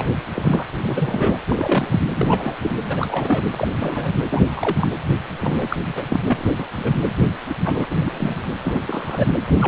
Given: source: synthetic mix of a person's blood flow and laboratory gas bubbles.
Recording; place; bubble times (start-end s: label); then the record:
Doppler ultrasound of blood flow; precordium
0.00-0.08 s: bubbles
0.34-0.63 s: bubbles
0.82-1.38 s: bubbles
1.49-2.06 s: bubbles
2.16-2.55 s: bubbles
2.62-2.70 s: bubbles
2.84-3.42 s: bubbles
3.57-3.68 s: bubbles
3.77-4.12 s: bubbles
4.29-4.44 s: bubbles
4.57-4.88 s: bubbles
5.41-5.77 s: bubbles
5.96-6.03 s: bubbles
6.09-6.20 s: bubbles
6.25-6.46 s: bubbles
6.59-6.65 s: bubbles
6.76-6.95 s: bubbles
7.49-7.54 s: bubbles
7.65-7.87 s: bubbles
7.90-8.38 s: bubbles
8.63-8.81 s: bubbles
8.87-9.26 s: bubbles
9.48-9.68 s: bubbles
From the record:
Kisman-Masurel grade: 242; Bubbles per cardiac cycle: several, 3 to 8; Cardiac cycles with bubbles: 100%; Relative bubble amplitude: moderate (0.250 to 0.450); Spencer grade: 3 (all of the cardiac periods contain showers or single bubble signals, but not dominating or overriding the cardiac motion signals); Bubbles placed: anywhere in the cardiac cycle